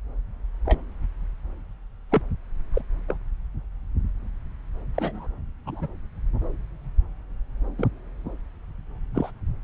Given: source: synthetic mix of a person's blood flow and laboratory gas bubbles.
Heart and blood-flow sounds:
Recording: Doppler ultrasound of blood flow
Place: subclavian vein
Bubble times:
0.65-0.80 s: bubbles
2.10-2.22 s: bubbles
2.73-2.81 s: bubbles
3.08-3.17 s: bubbles
4.94-5.27 s: bubbles
5.65-5.87 s: bubbles
7.78-7.88 s: bubbles
9.14-9.31 s: bubbles
From the record:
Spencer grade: 2 (many but less than half of the cardiac periods contain bubble signals, singularly or in groups)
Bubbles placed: anywhere in the cardiac cycle

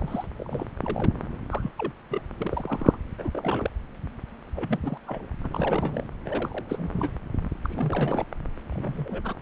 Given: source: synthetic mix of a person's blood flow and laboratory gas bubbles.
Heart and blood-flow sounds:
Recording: Doppler ultrasound of blood flow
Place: subclavian vein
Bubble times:
0.00-0.28 s: bubbles
0.38-0.66 s: bubbles
0.81-1.13 s: bubbles
1.50-1.71 s: bubbles
1.78-1.92 s: bubbles
2.10-2.22 s: bubbles
2.38-2.98 s: bubbles
3.18-3.30 s: bubbles
3.32-3.71 s: bubbles
4.55-4.80 s: bubbles
4.83-4.97 s: bubbles
5.07-5.29 s: bubbles
5.43-6.05 s: bubbles
6.25-6.64 s: bubbles
6.68-6.89 s: bubbles
6.92-7.12 s: bubbles
7.62-8.26 s: bubbles
8.70-9.34 s: bubbles
From the record:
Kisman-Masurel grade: 232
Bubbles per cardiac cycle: several, 3 to 8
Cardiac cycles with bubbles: 50 to 99%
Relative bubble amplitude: moderate (0.250 to 0.450)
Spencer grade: 3 (all of the cardiac periods contain showers or single bubble signals, but not dominating or overriding the cardiac motion signals)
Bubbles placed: anywhere in the cardiac cycle

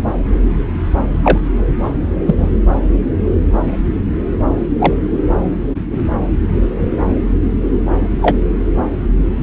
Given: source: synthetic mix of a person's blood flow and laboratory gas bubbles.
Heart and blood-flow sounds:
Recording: Doppler ultrasound of blood flow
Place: subclavian vein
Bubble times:
1.24-1.39 s: bubbles
2.26-2.50 s: bubbles
4.79-4.93 s: bubbles
8.21-8.37 s: bubbles
From the record:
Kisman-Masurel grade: 123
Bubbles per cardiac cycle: 1 to 2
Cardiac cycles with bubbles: 10 to 50%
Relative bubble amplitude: loud (0.450 to 0.775)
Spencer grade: 2 (many but less than half of the cardiac periods contain bubble signals, singularly or in groups)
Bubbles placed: anywhere in the cardiac cycle

